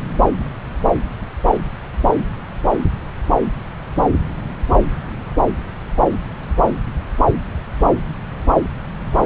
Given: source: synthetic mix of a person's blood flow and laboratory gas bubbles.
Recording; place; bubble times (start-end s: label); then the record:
Doppler ultrasound of blood flow; subclavian vein
no bubbles
From the record:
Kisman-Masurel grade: 000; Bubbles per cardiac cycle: 0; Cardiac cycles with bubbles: 0%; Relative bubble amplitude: no bubbles discernible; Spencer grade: 0 (complete lack of bubble signals)